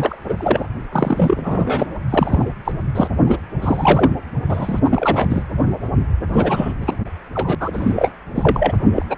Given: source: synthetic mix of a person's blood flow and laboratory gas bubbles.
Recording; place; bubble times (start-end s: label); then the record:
Doppler ultrasound of blood flow; precordium
0.00-0.16 s: bubbles
0.29-0.34 s: bubbles
0.37-0.66 s: bubbles
0.91-1.86 s: bubbles
2.10-2.50 s: bubbles
2.65-2.72 s: bubbles
2.95-3.07 s: bubbles
3.26-3.38 s: bubbles
3.61-4.11 s: bubbles
4.49-4.80 s: bubbles
4.84-5.45 s: bubbles
6.33-6.73 s: bubbles
6.81-6.96 s: bubbles
7.34-7.55 s: bubbles
7.60-8.12 s: bubbles
8.35-8.72 s: bubbles
8.96-9.02 s: bubbles
9.09-9.16 s: bubbles
From the record:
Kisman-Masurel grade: 343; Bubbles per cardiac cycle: rolling drumbeat, 9 or more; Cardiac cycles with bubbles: 100%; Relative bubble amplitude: loud (0.450 to 0.775); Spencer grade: 3 (all of the cardiac periods contain showers or single bubble signals, but not dominating or overriding the cardiac motion signals); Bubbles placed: anywhere in the cardiac cycle